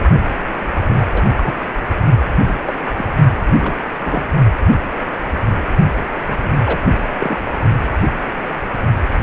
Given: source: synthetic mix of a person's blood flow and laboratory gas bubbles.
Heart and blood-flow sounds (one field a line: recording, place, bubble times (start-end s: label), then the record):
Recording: Doppler ultrasound of blood flow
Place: precordium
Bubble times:
0.89-1.06 s: bubbles
1.12-1.32 s: bubbles
1.35-1.54 s: bubbles
2.47-2.54 s: bubbles
2.66-2.75 s: bubbles
2.97-3.12 s: bubbles
3.59-3.76 s: bubbles
3.79-3.82 s: bubbles
4.03-4.29 s: bubbles
6.24-6.54 s: bubbles
6.65-6.80 s: bubbles
7.19-7.40 s: bubbles
9.13-9.19 s: bubbles
From the record:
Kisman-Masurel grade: 232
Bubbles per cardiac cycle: several, 3 to 8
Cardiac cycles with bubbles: 50 to 99%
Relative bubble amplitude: moderate (0.250 to 0.450)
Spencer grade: 3 (all of the cardiac periods contain showers or single bubble signals, but not dominating or overriding the cardiac motion signals)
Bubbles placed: only in the low amplitude regions of the cardiac cycle